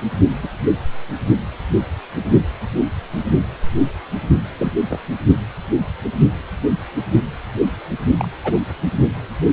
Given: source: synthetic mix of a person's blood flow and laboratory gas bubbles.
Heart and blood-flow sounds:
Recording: Doppler ultrasound of blood flow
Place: precordium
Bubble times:
0.43-0.48 s: bubbles
4.58-4.72 s: bubbles
4.90-4.99 s: bubbles
8.19-8.28 s: bubbles
8.44-8.59 s: bubbles
From the record:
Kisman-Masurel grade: 122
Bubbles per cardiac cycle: 1 to 2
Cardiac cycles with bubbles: 10 to 50%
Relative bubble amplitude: moderate (0.250 to 0.450)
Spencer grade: 2 (many but less than half of the cardiac periods contain bubble signals, singularly or in groups)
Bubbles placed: only in the low amplitude regions of the cardiac cycle

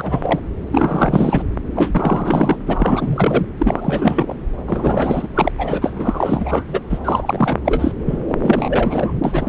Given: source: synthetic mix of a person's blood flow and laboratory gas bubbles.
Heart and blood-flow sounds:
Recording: Doppler ultrasound of blood flow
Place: subclavian vein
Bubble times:
0.00-0.40 s: bubbles
0.71-1.43 s: bubbles
1.75-2.56 s: bubbles
2.66-3.47 s: bubbles
3.58-4.41 s: bubbles
4.67-5.28 s: bubbles
5.34-5.51 s: bubbles
5.58-6.64 s: bubbles
6.67-6.80 s: bubbles
6.89-6.99 s: bubbles
7.04-7.58 s: bubbles
7.65-7.94 s: bubbles
8.06-8.24 s: bubbles
8.28-9.20 s: bubbles
9.24-9.49 s: bubbles
From the record:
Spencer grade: 4 (maximum detectable bubble signal sounding continuously throughout systole and diastole of every cardiac period, and overriding the amplitude of the normal cardiac signals)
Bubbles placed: anywhere in the cardiac cycle

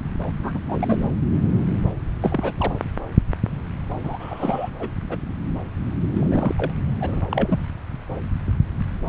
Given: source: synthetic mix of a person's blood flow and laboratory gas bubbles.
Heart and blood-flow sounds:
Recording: Doppler ultrasound of blood flow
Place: subclavian vein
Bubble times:
0.23-0.33 s: bubbles
0.43-0.58 s: bubbles
0.68-0.99 s: bubbles
1.04-1.11 s: bubbles
2.21-2.73 s: bubbles
4.03-4.70 s: bubbles
4.79-4.89 s: bubbles
5.09-5.18 s: bubbles
6.13-6.72 s: bubbles
7.00-7.21 s: bubbles
7.29-7.65 s: bubbles
From the record:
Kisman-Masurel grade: 222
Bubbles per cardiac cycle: several, 3 to 8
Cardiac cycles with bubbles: 10 to 50%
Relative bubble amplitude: moderate (0.250 to 0.450)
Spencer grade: 2 (many but less than half of the cardiac periods contain bubble signals, singularly or in groups)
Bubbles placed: anywhere in the cardiac cycle

